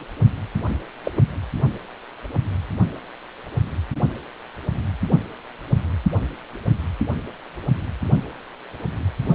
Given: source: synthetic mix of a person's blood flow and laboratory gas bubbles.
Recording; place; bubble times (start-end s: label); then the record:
Doppler ultrasound of blood flow; precordium
1.04-1.11 s: bubbles
1.15-1.23 s: bubbles
From the record:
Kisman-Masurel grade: 122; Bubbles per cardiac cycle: 1 to 2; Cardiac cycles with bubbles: 10 to 50%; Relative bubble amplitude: moderate (0.250 to 0.450); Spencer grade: 2 (many but less than half of the cardiac periods contain bubble signals, singularly or in groups); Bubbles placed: only in the low amplitude regions of the cardiac cycle